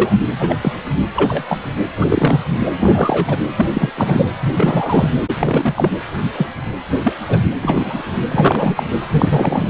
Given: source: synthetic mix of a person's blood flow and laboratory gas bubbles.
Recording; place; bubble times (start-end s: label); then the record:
Doppler ultrasound of blood flow; precordium
0.00-0.18 s: bubbles
0.40-0.55 s: bubbles
0.61-0.72 s: bubbles
1.14-1.59 s: bubbles
1.97-2.38 s: bubbles
2.50-2.67 s: bubbles
2.79-3.37 s: bubbles
3.57-3.67 s: bubbles
3.69-3.94 s: bubbles
3.97-4.26 s: bubbles
4.40-5.13 s: bubbles
5.39-5.90 s: bubbles
6.35-6.46 s: bubbles
7.04-7.13 s: bubbles
7.28-7.38 s: bubbles
7.62-8.03 s: bubbles
8.30-8.83 s: bubbles
9.10-9.69 s: bubbles
From the record:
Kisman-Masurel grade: 243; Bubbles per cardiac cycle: several, 3 to 8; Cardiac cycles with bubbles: 100%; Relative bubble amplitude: loud (0.450 to 0.775); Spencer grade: 3 (all of the cardiac periods contain showers or single bubble signals, but not dominating or overriding the cardiac motion signals); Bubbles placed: anywhere in the cardiac cycle